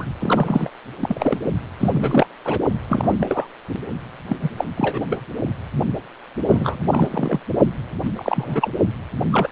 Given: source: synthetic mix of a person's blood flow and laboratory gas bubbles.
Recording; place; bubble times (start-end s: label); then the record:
Doppler ultrasound of blood flow; precordium
0.00-0.05 s: bubbles
0.19-0.70 s: bubbles
0.99-1.38 s: bubbles
1.80-2.26 s: bubbles
2.45-2.59 s: bubbles
2.89-3.14 s: bubbles
3.20-3.47 s: bubbles
4.28-4.36 s: bubbles
4.42-4.49 s: bubbles
4.56-4.64 s: bubbles
4.77-5.06 s: bubbles
5.09-5.20 s: bubbles
6.47-7.40 s: bubbles
8.04-8.12 s: bubbles
8.16-8.71 s: bubbles
9.32-9.49 s: bubbles
From the record:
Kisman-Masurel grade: 242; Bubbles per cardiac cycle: several, 3 to 8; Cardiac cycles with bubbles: 100%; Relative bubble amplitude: moderate (0.250 to 0.450); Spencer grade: 3 (all of the cardiac periods contain showers or single bubble signals, but not dominating or overriding the cardiac motion signals); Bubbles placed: only in the low amplitude regions of the cardiac cycle